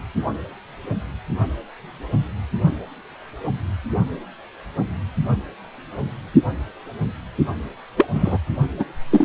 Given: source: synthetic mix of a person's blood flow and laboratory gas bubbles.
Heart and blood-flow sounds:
Doppler ultrasound of blood flow; precordium
7.97-8.07 s: bubbles
8.14-8.38 s: bubbles
8.79-8.85 s: bubbles
9.11-9.24 s: bubbles
From the record:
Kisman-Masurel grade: 233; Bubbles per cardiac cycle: several, 3 to 8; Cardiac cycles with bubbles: 50 to 99%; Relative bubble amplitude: loud (0.450 to 0.775); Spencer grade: 3 (all of the cardiac periods contain showers or single bubble signals, but not dominating or overriding the cardiac motion signals); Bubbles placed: only in the low amplitude regions of the cardiac cycle

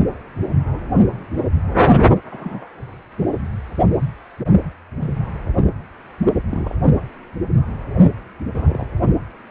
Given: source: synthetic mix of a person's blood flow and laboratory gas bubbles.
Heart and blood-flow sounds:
Doppler ultrasound of blood flow; precordium
2.30-2.68 s: bubbles
5.00-5.27 s: bubbles
6.49-6.76 s: bubbles
8.54-8.85 s: bubbles
From the record:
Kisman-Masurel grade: 121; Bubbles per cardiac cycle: 1 to 2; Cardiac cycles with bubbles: 10 to 50%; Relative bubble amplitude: barely perceptible (0.100 to 0.250); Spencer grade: 2 (many but less than half of the cardiac periods contain bubble signals, singularly or in groups); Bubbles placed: only in the low amplitude regions of the cardiac cycle

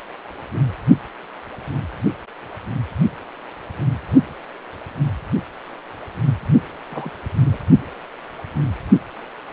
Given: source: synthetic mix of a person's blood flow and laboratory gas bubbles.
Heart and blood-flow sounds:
Doppler ultrasound of blood flow; precordium
6.90-7.10 s: bubbles
7.46-7.58 s: bubbles
From the record:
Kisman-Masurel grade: 111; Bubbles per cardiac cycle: 1 to 2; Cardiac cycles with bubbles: 1 to 10%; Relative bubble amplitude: barely perceptible (0.100 to 0.250); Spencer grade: 1 (occasional bubble signal discernible with the cardiac motion signal, with majority of cardiac periods free of bubbles); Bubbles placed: only in the low amplitude regions of the cardiac cycle

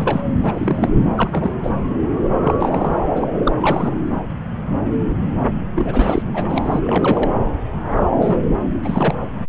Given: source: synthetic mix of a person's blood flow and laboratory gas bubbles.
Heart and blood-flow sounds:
Doppler ultrasound of blood flow; subclavian vein
0.00-0.23 s: bubbles
0.42-0.89 s: bubbles
1.15-1.52 s: bubbles
1.63-1.70 s: bubbles
2.40-2.54 s: bubbles
2.58-2.98 s: bubbles
3.17-3.27 s: bubbles
3.45-3.56 s: bubbles
3.60-3.96 s: bubbles
5.75-6.22 s: bubbles
6.25-6.79 s: bubbles
6.84-7.30 s: bubbles
8.21-8.44 s: bubbles
8.84-9.15 s: bubbles
From the record:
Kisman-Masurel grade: 232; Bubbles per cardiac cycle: several, 3 to 8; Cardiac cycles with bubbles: 50 to 99%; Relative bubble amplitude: moderate (0.250 to 0.450); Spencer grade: 3 (all of the cardiac periods contain showers or single bubble signals, but not dominating or overriding the cardiac motion signals); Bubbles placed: anywhere in the cardiac cycle

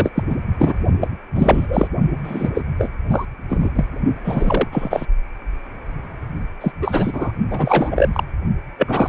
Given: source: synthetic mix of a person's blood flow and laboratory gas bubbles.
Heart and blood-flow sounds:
Doppler ultrasound of blood flow; precordium
0.00-0.12 s: bubbles
0.15-0.23 s: bubbles
0.30-0.35 s: bubbles
0.58-0.73 s: bubbles
1.01-1.09 s: bubbles
1.35-1.88 s: bubbles
2.23-2.50 s: bubbles
2.54-2.62 s: bubbles
2.79-2.91 s: bubbles
3.10-3.25 s: bubbles
3.49-3.70 s: bubbles
3.75-3.85 s: bubbles
4.24-4.68 s: bubbles
4.71-5.06 s: bubbles
6.61-6.71 s: bubbles
6.81-7.32 s: bubbles
7.50-8.09 s: bubbles
8.12-8.23 s: bubbles
8.79-9.09 s: bubbles
From the record:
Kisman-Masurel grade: 333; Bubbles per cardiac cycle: rolling drumbeat, 9 or more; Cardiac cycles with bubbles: 50 to 99%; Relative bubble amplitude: loud (0.450 to 0.775); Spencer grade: 3 (all of the cardiac periods contain showers or single bubble signals, but not dominating or overriding the cardiac motion signals); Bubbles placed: only in the low amplitude regions of the cardiac cycle

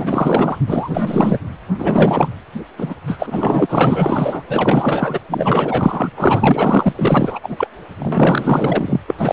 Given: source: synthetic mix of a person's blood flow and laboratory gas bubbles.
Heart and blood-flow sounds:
Doppler ultrasound of blood flow; precordium
0.00-0.58 s: bubbles
0.67-1.39 s: bubbles
1.78-2.29 s: bubbles
2.77-2.94 s: bubbles
3.07-3.67 s: bubbles
3.69-4.43 s: bubbles
4.48-5.19 s: bubbles
5.29-6.10 s: bubbles
6.17-6.93 s: bubbles
6.96-7.39 s: bubbles
7.43-7.68 s: bubbles
7.99-9.00 s: bubbles
9.07-9.15 s: bubbles
9.19-9.33 s: bubbles
From the record:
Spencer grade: 4 (maximum detectable bubble signal sounding continuously throughout systole and diastole of every cardiac period, and overriding the amplitude of the normal cardiac signals); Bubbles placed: anywhere in the cardiac cycle

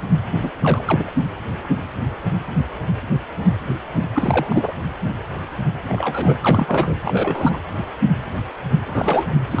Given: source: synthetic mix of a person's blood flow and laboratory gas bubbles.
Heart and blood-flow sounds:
Doppler ultrasound of blood flow; precordium
0.41-0.50 s: bubbles
0.61-1.11 s: bubbles
4.14-4.72 s: bubbles
5.88-6.38 s: bubbles
6.41-6.94 s: bubbles
7.04-7.60 s: bubbles
8.86-9.27 s: bubbles
9.52-9.60 s: bubbles
From the record:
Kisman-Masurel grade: 222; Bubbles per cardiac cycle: several, 3 to 8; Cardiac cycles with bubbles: 10 to 50%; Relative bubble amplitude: moderate (0.250 to 0.450); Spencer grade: 2 (many but less than half of the cardiac periods contain bubble signals, singularly or in groups); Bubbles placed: anywhere in the cardiac cycle

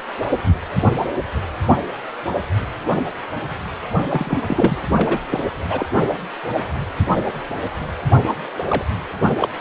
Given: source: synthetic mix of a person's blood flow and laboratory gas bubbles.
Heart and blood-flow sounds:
Doppler ultrasound of blood flow; precordium
3.94-4.03 s: bubbles
4.08-4.40 s: bubbles
4.47-4.76 s: bubbles
4.94-5.20 s: bubbles
5.30-5.45 s: bubbles
5.70-5.87 s: bubbles
8.66-8.84 s: bubbles
9.41-9.48 s: bubbles
From the record:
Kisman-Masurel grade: 222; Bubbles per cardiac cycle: several, 3 to 8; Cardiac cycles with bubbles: 10 to 50%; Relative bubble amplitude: moderate (0.250 to 0.450); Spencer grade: 2 (many but less than half of the cardiac periods contain bubble signals, singularly or in groups); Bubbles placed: anywhere in the cardiac cycle

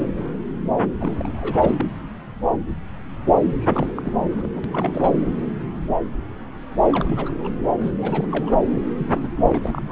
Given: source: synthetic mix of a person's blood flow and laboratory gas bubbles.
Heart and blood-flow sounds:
Doppler ultrasound of blood flow; subclavian vein
1.00-1.86 s: bubbles
3.61-3.92 s: bubbles
3.96-4.12 s: bubbles
4.21-4.61 s: bubbles
4.64-4.69 s: bubbles
4.72-5.16 s: bubbles
6.83-7.33 s: bubbles
7.39-7.54 s: bubbles
7.81-7.93 s: bubbles
7.98-8.26 s: bubbles
8.29-8.59 s: bubbles
8.97-9.06 s: bubbles
9.15-9.29 s: bubbles
9.37-9.92 s: bubbles
From the record:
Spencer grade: 3 (all of the cardiac periods contain showers or single bubble signals, but not dominating or overriding the cardiac motion signals); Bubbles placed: anywhere in the cardiac cycle

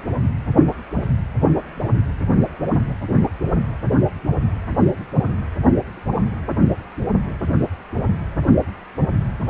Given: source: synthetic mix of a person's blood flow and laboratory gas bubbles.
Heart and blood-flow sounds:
Doppler ultrasound of blood flow; precordium
no bubbles
From the record:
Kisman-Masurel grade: 000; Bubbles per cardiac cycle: 0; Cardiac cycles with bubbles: 0%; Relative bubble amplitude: no bubbles discernible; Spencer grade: 0 (complete lack of bubble signals)

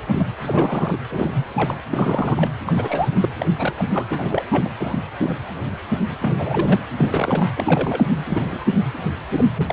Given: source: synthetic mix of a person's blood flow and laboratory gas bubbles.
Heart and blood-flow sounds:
Doppler ultrasound of blood flow; precordium
0.12-0.33 s: bubbles
0.41-0.97 s: bubbles
1.10-1.46 s: bubbles
1.56-1.75 s: bubbles
1.90-2.49 s: bubbles
2.66-3.10 s: bubbles
3.12-3.29 s: bubbles
3.40-3.48 s: bubbles
3.54-3.73 s: bubbles
3.77-3.85 s: bubbles
3.89-4.06 s: bubbles
4.10-4.43 s: bubbles
4.51-4.69 s: bubbles
4.78-4.98 s: bubbles
5.21-5.36 s: bubbles
6.21-6.79 s: bubbles
6.96-7.47 s: bubbles
7.57-8.07 s: bubbles
8.28-8.64 s: bubbles
9.37-9.45 s: bubbles
9.56-9.73 s: bubbles
From the record:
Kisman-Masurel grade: 232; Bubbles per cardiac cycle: several, 3 to 8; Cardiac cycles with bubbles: 50 to 99%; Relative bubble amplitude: moderate (0.250 to 0.450); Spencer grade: 3 (all of the cardiac periods contain showers or single bubble signals, but not dominating or overriding the cardiac motion signals); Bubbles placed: anywhere in the cardiac cycle

